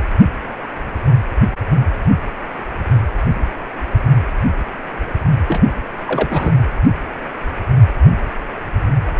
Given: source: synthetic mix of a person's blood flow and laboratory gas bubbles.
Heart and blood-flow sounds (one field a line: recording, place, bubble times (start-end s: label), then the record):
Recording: Doppler ultrasound of blood flow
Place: precordium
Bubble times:
5.48-5.62 s: bubbles
6.06-6.51 s: bubbles
From the record:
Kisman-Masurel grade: 222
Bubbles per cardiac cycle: several, 3 to 8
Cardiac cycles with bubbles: 10 to 50%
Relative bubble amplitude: moderate (0.250 to 0.450)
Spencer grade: 2 (many but less than half of the cardiac periods contain bubble signals, singularly or in groups)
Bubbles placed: anywhere in the cardiac cycle